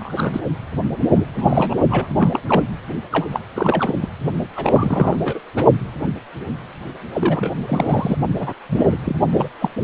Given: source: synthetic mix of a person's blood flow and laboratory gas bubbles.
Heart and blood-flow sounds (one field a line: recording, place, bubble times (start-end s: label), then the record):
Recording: Doppler ultrasound of blood flow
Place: precordium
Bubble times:
0.00-0.41 s: bubbles
1.00-1.10 s: bubbles
1.15-1.24 s: bubbles
1.34-1.76 s: bubbles
1.90-2.07 s: bubbles
2.19-2.40 s: bubbles
2.48-2.65 s: bubbles
3.12-3.27 s: bubbles
3.31-3.42 s: bubbles
3.55-4.08 s: bubbles
4.55-5.19 s: bubbles
5.24-5.40 s: bubbles
5.56-5.66 s: bubbles
7.13-8.16 s: bubbles
8.39-8.53 s: bubbles
8.69-8.97 s: bubbles
9.05-9.16 s: bubbles
9.32-9.49 s: bubbles
9.60-9.71 s: bubbles
From the record:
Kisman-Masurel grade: 332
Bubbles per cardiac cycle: rolling drumbeat, 9 or more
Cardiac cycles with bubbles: 50 to 99%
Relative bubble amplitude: moderate (0.250 to 0.450)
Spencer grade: 3 (all of the cardiac periods contain showers or single bubble signals, but not dominating or overriding the cardiac motion signals)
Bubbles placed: only in the low amplitude regions of the cardiac cycle